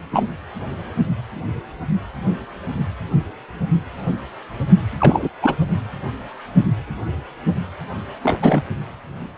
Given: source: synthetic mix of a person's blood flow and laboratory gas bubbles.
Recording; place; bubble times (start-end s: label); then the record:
Doppler ultrasound of blood flow; precordium
0.12-0.30 s: bubbles
4.99-5.28 s: bubbles
5.42-5.56 s: bubbles
8.22-8.37 s: bubbles
8.42-8.62 s: bubbles
From the record:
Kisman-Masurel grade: 223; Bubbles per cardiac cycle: several, 3 to 8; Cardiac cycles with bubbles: 10 to 50%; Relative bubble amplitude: loud (0.450 to 0.775); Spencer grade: 2 (many but less than half of the cardiac periods contain bubble signals, singularly or in groups); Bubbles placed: anywhere in the cardiac cycle